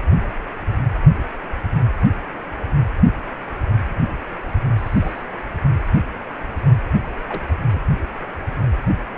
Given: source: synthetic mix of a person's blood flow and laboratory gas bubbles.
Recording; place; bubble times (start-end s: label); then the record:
Doppler ultrasound of blood flow; precordium
4.77-5.23 s: bubbles
7.28-7.53 s: bubbles
7.72-7.81 s: bubbles
From the record:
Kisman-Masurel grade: 121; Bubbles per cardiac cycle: 1 to 2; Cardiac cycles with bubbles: 10 to 50%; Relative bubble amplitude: barely perceptible (0.100 to 0.250); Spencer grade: 2 (many but less than half of the cardiac periods contain bubble signals, singularly or in groups); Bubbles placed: only in the low amplitude regions of the cardiac cycle